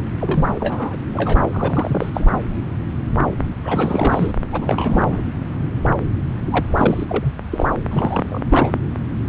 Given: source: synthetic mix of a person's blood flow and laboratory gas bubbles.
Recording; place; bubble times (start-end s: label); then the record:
Doppler ultrasound of blood flow; subclavian vein
0.20-0.96 s: bubbles
1.14-1.34 s: bubbles
1.42-1.47 s: bubbles
1.53-2.10 s: bubbles
2.14-2.25 s: bubbles
3.64-4.32 s: bubbles
4.52-5.24 s: bubbles
6.50-7.05 s: bubbles
7.09-7.33 s: bubbles
7.51-7.66 s: bubbles
7.91-8.41 s: bubbles
8.49-8.70 s: bubbles
From the record:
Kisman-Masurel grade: 332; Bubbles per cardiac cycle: rolling drumbeat, 9 or more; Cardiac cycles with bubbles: 50 to 99%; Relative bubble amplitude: moderate (0.250 to 0.450); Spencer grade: 3 (all of the cardiac periods contain showers or single bubble signals, but not dominating or overriding the cardiac motion signals); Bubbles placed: anywhere in the cardiac cycle